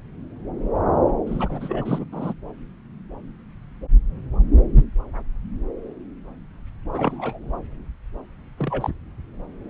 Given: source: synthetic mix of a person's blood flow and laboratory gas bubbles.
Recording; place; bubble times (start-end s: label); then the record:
Doppler ultrasound of blood flow; subclavian vein
1.26-2.04 s: bubbles
2.12-2.33 s: bubbles
6.93-7.39 s: bubbles
8.57-8.90 s: bubbles
From the record:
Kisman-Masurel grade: 221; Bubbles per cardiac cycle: several, 3 to 8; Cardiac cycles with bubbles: 10 to 50%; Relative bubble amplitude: barely perceptible (0.100 to 0.250); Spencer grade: 2 (many but less than half of the cardiac periods contain bubble signals, singularly or in groups); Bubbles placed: anywhere in the cardiac cycle